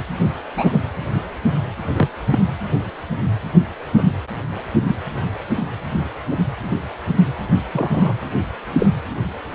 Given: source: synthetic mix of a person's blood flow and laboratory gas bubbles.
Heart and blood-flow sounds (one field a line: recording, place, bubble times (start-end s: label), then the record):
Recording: Doppler ultrasound of blood flow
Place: precordium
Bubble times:
0.57-0.80 s: bubbles
1.94-2.08 s: bubbles
2.31-2.38 s: bubbles
3.97-4.04 s: bubbles
4.87-4.95 s: bubbles
6.31-6.38 s: bubbles
7.72-8.14 s: bubbles
8.78-8.87 s: bubbles
From the record:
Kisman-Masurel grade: 122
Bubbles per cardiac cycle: 1 to 2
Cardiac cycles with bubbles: 10 to 50%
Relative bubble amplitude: moderate (0.250 to 0.450)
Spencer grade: 2 (many but less than half of the cardiac periods contain bubble signals, singularly or in groups)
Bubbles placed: anywhere in the cardiac cycle